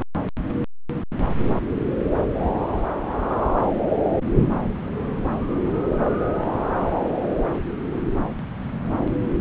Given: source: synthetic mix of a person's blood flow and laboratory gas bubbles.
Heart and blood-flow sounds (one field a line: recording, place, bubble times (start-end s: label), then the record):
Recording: Doppler ultrasound of blood flow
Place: subclavian vein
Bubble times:
no bubbles
From the record:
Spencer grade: 0 (complete lack of bubble signals)